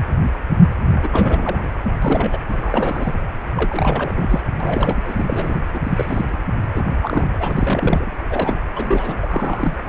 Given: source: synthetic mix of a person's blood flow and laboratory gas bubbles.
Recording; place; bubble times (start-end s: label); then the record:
Doppler ultrasound of blood flow; precordium
0.98-1.67 s: bubbles
2.02-2.39 s: bubbles
2.46-3.15 s: bubbles
3.55-4.41 s: bubbles
4.60-5.02 s: bubbles
5.06-5.59 s: bubbles
5.74-6.37 s: bubbles
6.67-6.83 s: bubbles
7.02-7.28 s: bubbles
7.33-8.12 s: bubbles
8.29-8.60 s: bubbles
8.76-9.16 s: bubbles
9.23-9.76 s: bubbles
From the record:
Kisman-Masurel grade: 332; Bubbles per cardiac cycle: rolling drumbeat, 9 or more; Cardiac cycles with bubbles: 50 to 99%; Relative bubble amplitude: moderate (0.250 to 0.450); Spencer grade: 3 (all of the cardiac periods contain showers or single bubble signals, but not dominating or overriding the cardiac motion signals); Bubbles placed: anywhere in the cardiac cycle